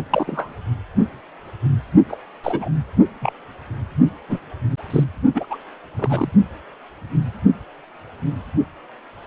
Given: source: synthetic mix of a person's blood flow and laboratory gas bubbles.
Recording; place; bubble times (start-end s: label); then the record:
Doppler ultrasound of blood flow; precordium
0.10-0.53 s: bubbles
2.09-2.17 s: bubbles
2.43-2.69 s: bubbles
3.21-3.33 s: bubbles
4.28-4.39 s: bubbles
4.90-5.04 s: bubbles
5.34-5.46 s: bubbles
5.50-5.57 s: bubbles
5.97-6.32 s: bubbles
From the record:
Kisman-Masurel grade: 222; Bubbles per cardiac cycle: several, 3 to 8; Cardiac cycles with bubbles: 10 to 50%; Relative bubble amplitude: moderate (0.250 to 0.450); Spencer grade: 2 (many but less than half of the cardiac periods contain bubble signals, singularly or in groups); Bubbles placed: only in the low amplitude regions of the cardiac cycle